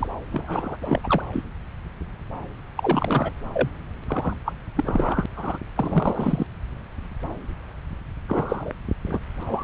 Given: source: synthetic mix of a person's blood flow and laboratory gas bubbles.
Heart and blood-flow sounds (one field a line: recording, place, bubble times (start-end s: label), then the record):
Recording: Doppler ultrasound of blood flow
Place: subclavian vein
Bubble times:
0.00-0.07 s: bubbles
0.32-0.77 s: bubbles
0.81-1.01 s: bubbles
1.03-1.23 s: bubbles
1.33-1.43 s: bubbles
2.77-3.33 s: bubbles
3.54-3.69 s: bubbles
4.08-4.36 s: bubbles
4.45-4.53 s: bubbles
4.75-5.26 s: bubbles
5.36-5.59 s: bubbles
5.76-6.47 s: bubbles
8.28-8.73 s: bubbles
9.07-9.19 s: bubbles
9.41-9.43 s: bubbles
9.46-9.64 s: bubbles
From the record:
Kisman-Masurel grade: 332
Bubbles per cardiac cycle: rolling drumbeat, 9 or more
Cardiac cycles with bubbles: 50 to 99%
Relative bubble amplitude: moderate (0.250 to 0.450)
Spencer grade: 3 (all of the cardiac periods contain showers or single bubble signals, but not dominating or overriding the cardiac motion signals)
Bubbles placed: anywhere in the cardiac cycle